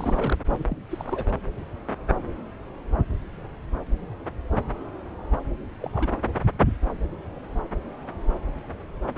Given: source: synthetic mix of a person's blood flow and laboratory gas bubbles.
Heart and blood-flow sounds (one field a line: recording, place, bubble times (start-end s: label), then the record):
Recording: Doppler ultrasound of blood flow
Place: subclavian vein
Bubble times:
0.00-0.37 s: bubbles
0.49-0.65 s: bubbles
0.69-0.81 s: bubbles
0.91-1.31 s: bubbles
5.80-6.07 s: bubbles
From the record:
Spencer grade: 2 (many but less than half of the cardiac periods contain bubble signals, singularly or in groups)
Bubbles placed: anywhere in the cardiac cycle